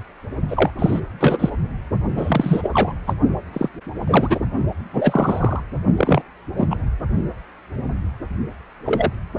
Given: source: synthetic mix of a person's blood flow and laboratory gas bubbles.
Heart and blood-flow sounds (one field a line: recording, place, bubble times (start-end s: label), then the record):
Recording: Doppler ultrasound of blood flow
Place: precordium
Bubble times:
0.48-0.71 s: bubbles
0.78-1.00 s: bubbles
1.20-1.50 s: bubbles
2.16-2.70 s: bubbles
2.73-2.93 s: bubbles
3.06-3.14 s: bubbles
3.52-3.69 s: bubbles
4.07-4.39 s: bubbles
4.93-5.60 s: bubbles
5.96-6.22 s: bubbles
6.56-6.67 s: bubbles
6.70-6.76 s: bubbles
8.86-9.11 s: bubbles
From the record:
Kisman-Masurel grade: 233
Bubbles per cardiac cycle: several, 3 to 8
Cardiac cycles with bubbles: 50 to 99%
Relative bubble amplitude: loud (0.450 to 0.775)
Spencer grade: 3 (all of the cardiac periods contain showers or single bubble signals, but not dominating or overriding the cardiac motion signals)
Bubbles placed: only in the low amplitude regions of the cardiac cycle